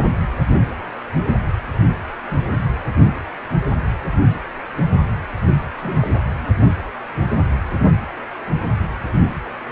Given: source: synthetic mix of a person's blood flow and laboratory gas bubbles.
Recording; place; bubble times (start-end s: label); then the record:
Doppler ultrasound of blood flow; precordium
5.82-6.09 s: bubbles
From the record:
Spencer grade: 2 (many but less than half of the cardiac periods contain bubble signals, singularly or in groups); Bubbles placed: anywhere in the cardiac cycle